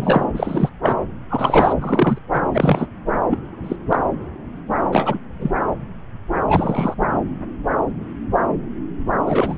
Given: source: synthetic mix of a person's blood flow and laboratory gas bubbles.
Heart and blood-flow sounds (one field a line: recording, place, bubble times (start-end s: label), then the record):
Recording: Doppler ultrasound of blood flow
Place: subclavian vein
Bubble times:
0.00-0.25 s: bubbles
0.34-0.70 s: bubbles
0.82-0.95 s: bubbles
1.30-1.74 s: bubbles
1.80-2.18 s: bubbles
2.33-2.41 s: bubbles
2.53-2.86 s: bubbles
3.30-3.38 s: bubbles
3.63-3.76 s: bubbles
3.91-4.00 s: bubbles
4.92-5.19 s: bubbles
5.39-5.51 s: bubbles
6.48-6.94 s: bubbles
9.26-9.57 s: bubbles
From the record:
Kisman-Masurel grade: 233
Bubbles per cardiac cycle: several, 3 to 8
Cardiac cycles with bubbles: 50 to 99%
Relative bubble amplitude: loud (0.450 to 0.775)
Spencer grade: 3 (all of the cardiac periods contain showers or single bubble signals, but not dominating or overriding the cardiac motion signals)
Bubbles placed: anywhere in the cardiac cycle